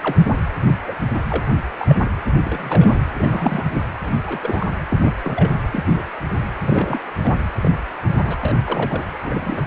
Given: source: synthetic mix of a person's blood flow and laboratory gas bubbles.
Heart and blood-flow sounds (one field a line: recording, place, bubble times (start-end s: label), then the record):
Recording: Doppler ultrasound of blood flow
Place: precordium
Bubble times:
0.00-0.17 s: bubbles
0.23-0.33 s: bubbles
0.87-0.93 s: bubbles
1.13-1.21 s: bubbles
1.28-1.53 s: bubbles
1.79-1.86 s: bubbles
1.89-1.95 s: bubbles
2.45-3.04 s: bubbles
3.18-3.66 s: bubbles
3.69-3.78 s: bubbles
4.03-4.12 s: bubbles
4.25-4.39 s: bubbles
4.42-4.67 s: bubbles
4.90-5.14 s: bubbles
5.23-5.50 s: bubbles
5.72-6.02 s: bubbles
6.58-7.01 s: bubbles
7.23-7.35 s: bubbles
7.62-7.71 s: bubbles
8.19-8.37 s: bubbles
8.41-8.55 s: bubbles
8.66-9.03 s: bubbles
9.22-9.67 s: bubbles
From the record:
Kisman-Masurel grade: 242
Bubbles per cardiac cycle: several, 3 to 8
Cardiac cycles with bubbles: 100%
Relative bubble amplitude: moderate (0.250 to 0.450)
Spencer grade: 3 (all of the cardiac periods contain showers or single bubble signals, but not dominating or overriding the cardiac motion signals)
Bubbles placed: anywhere in the cardiac cycle